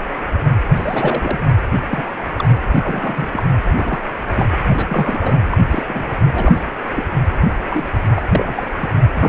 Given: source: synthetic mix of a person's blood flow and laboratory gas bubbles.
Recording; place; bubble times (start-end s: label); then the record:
Doppler ultrasound of blood flow; precordium
0.74-1.50 s: bubbles
1.91-2.11 s: bubbles
2.36-2.49 s: bubbles
2.74-3.29 s: bubbles
3.33-3.43 s: bubbles
3.71-4.00 s: bubbles
4.37-4.46 s: bubbles
4.67-5.40 s: bubbles
5.51-5.58 s: bubbles
5.69-5.83 s: bubbles
5.86-6.25 s: bubbles
6.34-6.58 s: bubbles
6.94-7.03 s: bubbles
7.70-7.84 s: bubbles
8.15-8.22 s: bubbles
8.33-8.65 s: bubbles
8.80-8.90 s: bubbles
9.15-9.29 s: bubbles
From the record:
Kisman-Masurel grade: 232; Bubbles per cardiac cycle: several, 3 to 8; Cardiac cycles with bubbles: 50 to 99%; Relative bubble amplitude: moderate (0.250 to 0.450); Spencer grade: 3 (all of the cardiac periods contain showers or single bubble signals, but not dominating or overriding the cardiac motion signals); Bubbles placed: anywhere in the cardiac cycle